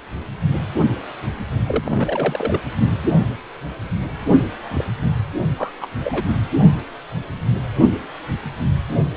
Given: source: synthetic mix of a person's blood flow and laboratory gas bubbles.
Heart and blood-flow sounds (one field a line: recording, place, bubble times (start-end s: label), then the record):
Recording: Doppler ultrasound of blood flow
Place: precordium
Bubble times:
1.66-2.60 s: bubbles
4.68-4.85 s: bubbles
5.42-5.73 s: bubbles
5.80-5.87 s: bubbles
6.04-6.22 s: bubbles
From the record:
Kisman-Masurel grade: 222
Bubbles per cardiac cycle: several, 3 to 8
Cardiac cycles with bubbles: 10 to 50%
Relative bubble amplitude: moderate (0.250 to 0.450)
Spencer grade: 2 (many but less than half of the cardiac periods contain bubble signals, singularly or in groups)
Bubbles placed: only in the low amplitude regions of the cardiac cycle